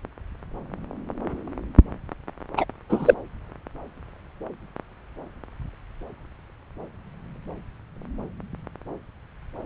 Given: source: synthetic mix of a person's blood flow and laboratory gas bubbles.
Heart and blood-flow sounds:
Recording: Doppler ultrasound of blood flow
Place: subclavian vein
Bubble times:
2.57-2.65 s: bubbles
2.89-3.14 s: bubbles
From the record:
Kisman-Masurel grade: 223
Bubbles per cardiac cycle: several, 3 to 8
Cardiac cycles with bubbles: 10 to 50%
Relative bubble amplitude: loud (0.450 to 0.775)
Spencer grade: 2 (many but less than half of the cardiac periods contain bubble signals, singularly or in groups)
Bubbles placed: anywhere in the cardiac cycle

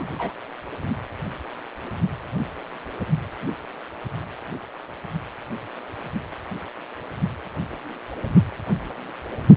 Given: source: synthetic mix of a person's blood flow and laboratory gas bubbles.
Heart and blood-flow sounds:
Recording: Doppler ultrasound of blood flow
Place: precordium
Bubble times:
0.00-0.07 s: bubbles
0.14-0.33 s: bubbles
From the record:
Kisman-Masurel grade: 112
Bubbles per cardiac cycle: 1 to 2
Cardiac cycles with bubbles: 1 to 10%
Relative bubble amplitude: moderate (0.250 to 0.450)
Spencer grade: 1 (occasional bubble signal discernible with the cardiac motion signal, with majority of cardiac periods free of bubbles)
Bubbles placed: anywhere in the cardiac cycle

